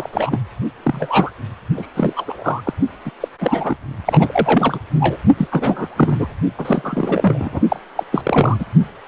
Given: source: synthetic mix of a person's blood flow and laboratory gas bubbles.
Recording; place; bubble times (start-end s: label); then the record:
Doppler ultrasound of blood flow; precordium
0.00-0.10 s: bubbles
0.12-0.41 s: bubbles
0.83-1.31 s: bubbles
1.77-1.87 s: bubbles
1.95-2.13 s: bubbles
2.16-2.61 s: bubbles
2.65-2.73 s: bubbles
3.05-3.11 s: bubbles
3.20-3.28 s: bubbles
3.40-3.76 s: bubbles
4.05-4.79 s: bubbles
5.00-5.17 s: bubbles
5.37-5.47 s: bubbles
5.51-5.88 s: bubbles
5.96-6.33 s: bubbles
6.58-7.60 s: bubbles
7.68-7.80 s: bubbles
7.95-8.03 s: bubbles
8.11-8.65 s: bubbles
From the record:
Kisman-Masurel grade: 333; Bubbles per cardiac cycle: rolling drumbeat, 9 or more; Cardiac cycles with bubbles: 50 to 99%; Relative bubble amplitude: loud (0.450 to 0.775); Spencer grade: 3 (all of the cardiac periods contain showers or single bubble signals, but not dominating or overriding the cardiac motion signals); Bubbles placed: only in the low amplitude regions of the cardiac cycle